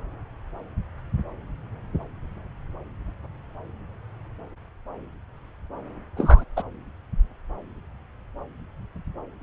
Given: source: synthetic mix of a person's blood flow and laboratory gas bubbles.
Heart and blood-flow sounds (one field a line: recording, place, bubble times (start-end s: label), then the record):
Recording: Doppler ultrasound of blood flow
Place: subclavian vein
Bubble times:
6.17-6.45 s: bubbles
6.56-6.62 s: bubbles
From the record:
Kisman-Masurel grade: 123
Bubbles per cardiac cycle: 1 to 2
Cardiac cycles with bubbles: 10 to 50%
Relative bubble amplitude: loud (0.450 to 0.775)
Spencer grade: 2 (many but less than half of the cardiac periods contain bubble signals, singularly or in groups)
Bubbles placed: anywhere in the cardiac cycle